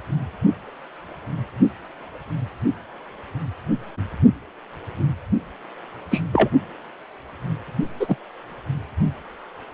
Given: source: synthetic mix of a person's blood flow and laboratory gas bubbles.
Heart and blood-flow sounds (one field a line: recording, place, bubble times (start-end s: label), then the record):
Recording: Doppler ultrasound of blood flow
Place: precordium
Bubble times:
6.10-6.25 s: bubbles
6.32-6.48 s: bubbles
7.99-8.16 s: bubbles
From the record:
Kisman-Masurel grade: 123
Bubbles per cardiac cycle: 1 to 2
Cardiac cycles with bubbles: 10 to 50%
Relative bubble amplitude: loud (0.450 to 0.775)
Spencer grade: 2 (many but less than half of the cardiac periods contain bubble signals, singularly or in groups)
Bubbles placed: only in the low amplitude regions of the cardiac cycle